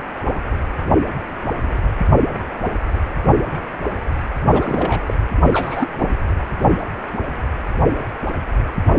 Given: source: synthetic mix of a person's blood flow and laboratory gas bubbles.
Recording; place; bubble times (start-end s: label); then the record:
Doppler ultrasound of blood flow; precordium
4.46-5.14 s: bubbles
5.53-5.89 s: bubbles
5.98-6.09 s: bubbles
From the record:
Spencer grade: 2 (many but less than half of the cardiac periods contain bubble signals, singularly or in groups); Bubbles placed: anywhere in the cardiac cycle